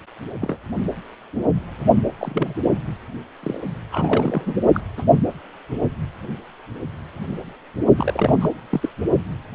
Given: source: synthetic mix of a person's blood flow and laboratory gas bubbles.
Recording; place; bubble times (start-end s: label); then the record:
Doppler ultrasound of blood flow; precordium
0.42-0.56 s: bubbles
2.18-2.54 s: bubbles
2.64-2.71 s: bubbles
3.43-3.60 s: bubbles
3.92-4.58 s: bubbles
4.74-4.80 s: bubbles
4.97-5.04 s: bubbles
7.97-8.49 s: bubbles
8.71-8.89 s: bubbles
From the record:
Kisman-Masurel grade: 222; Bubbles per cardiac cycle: several, 3 to 8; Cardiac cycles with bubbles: 10 to 50%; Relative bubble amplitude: moderate (0.250 to 0.450); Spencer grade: 2 (many but less than half of the cardiac periods contain bubble signals, singularly or in groups); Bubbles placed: only in the low amplitude regions of the cardiac cycle